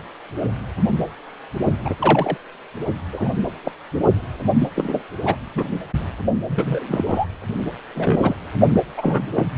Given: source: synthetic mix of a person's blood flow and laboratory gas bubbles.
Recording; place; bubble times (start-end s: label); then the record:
Doppler ultrasound of blood flow; precordium
1.84-1.95 s: bubbles
2.00-2.38 s: bubbles
3.12-3.28 s: bubbles
3.65-3.72 s: bubbles
4.59-4.70 s: bubbles
4.75-5.03 s: bubbles
5.25-5.36 s: bubbles
5.55-5.64 s: bubbles
6.49-7.04 s: bubbles
7.08-7.25 s: bubbles
7.95-8.34 s: bubbles
8.74-8.80 s: bubbles
8.97-9.27 s: bubbles
9.36-9.47 s: bubbles
9.56-9.58 s: bubbles
From the record:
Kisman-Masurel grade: 232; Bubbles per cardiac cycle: several, 3 to 8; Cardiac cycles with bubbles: 50 to 99%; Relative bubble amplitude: moderate (0.250 to 0.450); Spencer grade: 3 (all of the cardiac periods contain showers or single bubble signals, but not dominating or overriding the cardiac motion signals); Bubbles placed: only in the low amplitude regions of the cardiac cycle